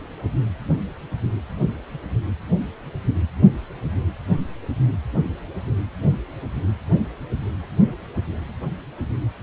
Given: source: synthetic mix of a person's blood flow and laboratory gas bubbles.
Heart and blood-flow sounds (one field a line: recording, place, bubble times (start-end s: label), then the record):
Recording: Doppler ultrasound of blood flow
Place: precordium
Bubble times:
no bubbles
From the record:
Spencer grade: 0 (complete lack of bubble signals)